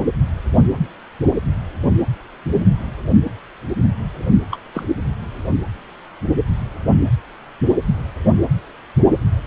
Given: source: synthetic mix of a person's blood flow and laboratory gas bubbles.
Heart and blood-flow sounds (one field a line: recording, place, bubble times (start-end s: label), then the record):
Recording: Doppler ultrasound of blood flow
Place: precordium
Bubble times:
4.50-4.58 s: bubbles
4.74-4.84 s: bubbles
From the record:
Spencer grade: 1 (occasional bubble signal discernible with the cardiac motion signal, with majority of cardiac periods free of bubbles)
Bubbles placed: anywhere in the cardiac cycle